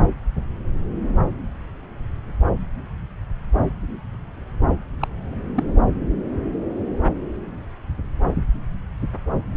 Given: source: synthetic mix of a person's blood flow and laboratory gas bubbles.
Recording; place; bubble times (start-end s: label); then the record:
Doppler ultrasound of blood flow; subclavian vein
5.00-5.08 s: bubbles
5.56-5.64 s: bubbles
From the record:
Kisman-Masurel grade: 112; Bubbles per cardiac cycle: 1 to 2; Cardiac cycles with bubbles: 1 to 10%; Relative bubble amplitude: moderate (0.250 to 0.450); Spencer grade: 1 (occasional bubble signal discernible with the cardiac motion signal, with majority of cardiac periods free of bubbles); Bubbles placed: anywhere in the cardiac cycle